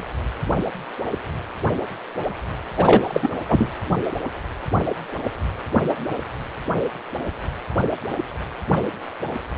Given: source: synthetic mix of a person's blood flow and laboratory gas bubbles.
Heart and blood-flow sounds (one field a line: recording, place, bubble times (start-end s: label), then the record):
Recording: Doppler ultrasound of blood flow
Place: precordium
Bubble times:
2.77-3.02 s: bubbles
3.07-3.29 s: bubbles
3.48-3.71 s: bubbles
From the record:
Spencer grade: 1 (occasional bubble signal discernible with the cardiac motion signal, with majority of cardiac periods free of bubbles)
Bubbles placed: anywhere in the cardiac cycle